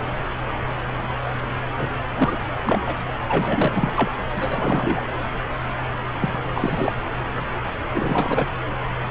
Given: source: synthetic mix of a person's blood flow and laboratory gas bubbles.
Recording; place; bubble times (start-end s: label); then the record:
Doppler ultrasound of blood flow; subclavian vein
1.76-1.90 s: bubbles
2.14-2.38 s: bubbles
2.65-2.82 s: bubbles
2.86-2.96 s: bubbles
3.28-3.92 s: bubbles
3.96-4.10 s: bubbles
4.35-5.01 s: bubbles
6.18-6.38 s: bubbles
6.54-6.95 s: bubbles
7.94-8.48 s: bubbles
From the record:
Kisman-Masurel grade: 222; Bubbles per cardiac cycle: several, 3 to 8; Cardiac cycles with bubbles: 10 to 50%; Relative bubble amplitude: moderate (0.250 to 0.450); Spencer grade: 2 (many but less than half of the cardiac periods contain bubble signals, singularly or in groups); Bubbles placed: anywhere in the cardiac cycle